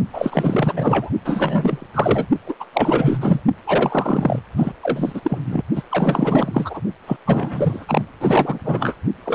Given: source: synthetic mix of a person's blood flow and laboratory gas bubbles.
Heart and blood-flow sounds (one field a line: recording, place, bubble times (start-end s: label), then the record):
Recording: Doppler ultrasound of blood flow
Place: precordium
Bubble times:
0.13-1.10 s: bubbles
1.24-1.87 s: bubbles
1.94-2.26 s: bubbles
2.46-2.55 s: bubbles
2.60-2.65 s: bubbles
2.72-3.41 s: bubbles
3.66-4.40 s: bubbles
4.56-4.72 s: bubbles
4.83-5.38 s: bubbles
5.46-5.61 s: bubbles
5.75-5.83 s: bubbles
5.90-6.80 s: bubbles
7.06-7.17 s: bubbles
7.25-8.02 s: bubbles
8.20-8.59 s: bubbles
8.63-8.95 s: bubbles
9.25-9.35 s: bubbles
From the record:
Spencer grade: 4 (maximum detectable bubble signal sounding continuously throughout systole and diastole of every cardiac period, and overriding the amplitude of the normal cardiac signals)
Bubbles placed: only in the low amplitude regions of the cardiac cycle